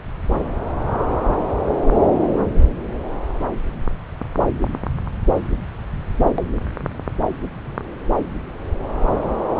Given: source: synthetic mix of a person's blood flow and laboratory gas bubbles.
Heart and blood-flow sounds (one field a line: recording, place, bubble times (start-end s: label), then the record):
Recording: Doppler ultrasound of blood flow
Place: subclavian vein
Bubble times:
no bubbles
From the record:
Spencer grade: 0 (complete lack of bubble signals)